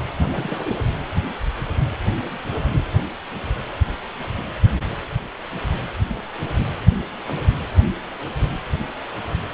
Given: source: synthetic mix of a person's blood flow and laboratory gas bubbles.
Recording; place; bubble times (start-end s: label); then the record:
Doppler ultrasound of blood flow; precordium
0.20-0.76 s: bubbles
From the record:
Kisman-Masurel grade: 211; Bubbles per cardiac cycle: several, 3 to 8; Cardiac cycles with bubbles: 1 to 10%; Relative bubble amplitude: barely perceptible (0.100 to 0.250); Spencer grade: 1 (occasional bubble signal discernible with the cardiac motion signal, with majority of cardiac periods free of bubbles); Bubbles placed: anywhere in the cardiac cycle